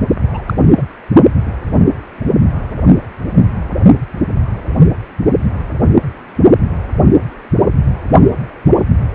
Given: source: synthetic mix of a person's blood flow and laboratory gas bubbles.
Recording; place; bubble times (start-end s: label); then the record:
Doppler ultrasound of blood flow; precordium
0.31-0.42 s: bubbles
0.46-0.54 s: bubbles
0.77-0.83 s: bubbles
From the record:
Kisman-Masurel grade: 212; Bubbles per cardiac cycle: several, 3 to 8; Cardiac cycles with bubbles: 1 to 10%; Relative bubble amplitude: moderate (0.250 to 0.450); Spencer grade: 1 (occasional bubble signal discernible with the cardiac motion signal, with majority of cardiac periods free of bubbles); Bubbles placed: only in the low amplitude regions of the cardiac cycle